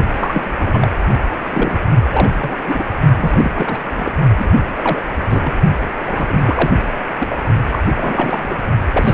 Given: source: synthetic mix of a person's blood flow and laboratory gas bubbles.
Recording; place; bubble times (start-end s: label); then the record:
Doppler ultrasound of blood flow; precordium
0.15-0.88 s: bubbles
1.50-1.79 s: bubbles
2.12-2.30 s: bubbles
2.40-2.58 s: bubbles
2.67-2.85 s: bubbles
2.91-2.96 s: bubbles
3.17-3.84 s: bubbles
3.96-4.12 s: bubbles
4.37-4.70 s: bubbles
4.76-5.03 s: bubbles
5.23-5.53 s: bubbles
6.05-6.71 s: bubbles
7.19-7.36 s: bubbles
7.72-7.79 s: bubbles
7.85-8.58 s: bubbles
8.93-9.14 s: bubbles
From the record:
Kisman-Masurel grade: 342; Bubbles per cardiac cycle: rolling drumbeat, 9 or more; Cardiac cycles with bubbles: 100%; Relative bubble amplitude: moderate (0.250 to 0.450); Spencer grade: 3 (all of the cardiac periods contain showers or single bubble signals, but not dominating or overriding the cardiac motion signals); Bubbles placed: only in the low amplitude regions of the cardiac cycle